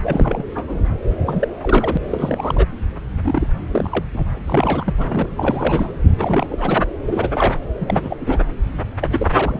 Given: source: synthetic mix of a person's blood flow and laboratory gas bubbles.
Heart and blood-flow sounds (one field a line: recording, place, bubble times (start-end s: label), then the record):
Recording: Doppler ultrasound of blood flow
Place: subclavian vein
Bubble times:
0.02-0.44 s: bubbles
0.55-0.80 s: bubbles
1.26-1.48 s: bubbles
1.58-1.98 s: bubbles
2.09-2.67 s: bubbles
3.24-3.48 s: bubbles
3.71-4.04 s: bubbles
4.12-4.31 s: bubbles
4.36-4.38 s: bubbles
4.46-4.94 s: bubbles
4.97-5.27 s: bubbles
5.37-5.92 s: bubbles
6.18-6.85 s: bubbles
7.07-7.29 s: bubbles
7.31-7.56 s: bubbles
7.79-8.16 s: bubbles
8.20-8.39 s: bubbles
9.01-9.28 s: bubbles
9.33-9.60 s: bubbles
From the record:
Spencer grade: 3 (all of the cardiac periods contain showers or single bubble signals, but not dominating or overriding the cardiac motion signals)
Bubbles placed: anywhere in the cardiac cycle